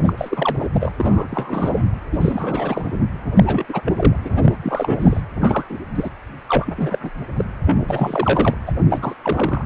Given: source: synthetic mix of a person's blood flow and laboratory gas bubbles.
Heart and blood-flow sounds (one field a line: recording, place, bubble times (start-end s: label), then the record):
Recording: Doppler ultrasound of blood flow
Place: precordium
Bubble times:
0.03-0.13 s: bubbles
0.17-0.68 s: bubbles
0.73-0.92 s: bubbles
0.97-1.28 s: bubbles
1.31-1.86 s: bubbles
2.12-2.18 s: bubbles
2.21-2.98 s: bubbles
3.35-3.66 s: bubbles
3.68-3.81 s: bubbles
3.85-4.16 s: bubbles
4.25-4.55 s: bubbles
4.62-5.21 s: bubbles
5.41-5.64 s: bubbles
5.69-5.78 s: bubbles
5.95-6.09 s: bubbles
6.48-6.74 s: bubbles
6.76-6.99 s: bubbles
7.03-7.10 s: bubbles
7.37-7.45 s: bubbles
7.65-8.55 s: bubbles
8.66-8.72 s: bubbles
8.90-9.14 s: bubbles
9.22-9.63 s: bubbles
From the record:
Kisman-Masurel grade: 342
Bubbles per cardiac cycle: rolling drumbeat, 9 or more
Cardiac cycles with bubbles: 100%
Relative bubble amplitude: moderate (0.250 to 0.450)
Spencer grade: 3 (all of the cardiac periods contain showers or single bubble signals, but not dominating or overriding the cardiac motion signals)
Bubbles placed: anywhere in the cardiac cycle